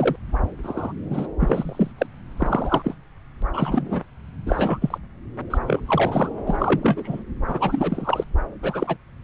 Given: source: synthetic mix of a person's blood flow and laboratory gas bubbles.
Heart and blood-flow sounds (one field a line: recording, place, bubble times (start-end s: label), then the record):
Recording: Doppler ultrasound of blood flow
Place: subclavian vein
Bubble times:
0.00-0.16 s: bubbles
0.63-0.93 s: bubbles
1.10-1.27 s: bubbles
1.40-1.92 s: bubbles
1.98-2.06 s: bubbles
2.38-2.95 s: bubbles
3.42-3.45 s: bubbles
3.54-4.01 s: bubbles
4.46-4.78 s: bubbles
4.82-4.98 s: bubbles
5.50-5.58 s: bubbles
5.67-5.80 s: bubbles
5.87-6.29 s: bubbles
6.46-7.22 s: bubbles
7.47-8.24 s: bubbles
8.62-8.96 s: bubbles
From the record:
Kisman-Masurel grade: 242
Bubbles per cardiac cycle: several, 3 to 8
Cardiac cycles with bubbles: 100%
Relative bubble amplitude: moderate (0.250 to 0.450)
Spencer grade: 3 (all of the cardiac periods contain showers or single bubble signals, but not dominating or overriding the cardiac motion signals)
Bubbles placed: anywhere in the cardiac cycle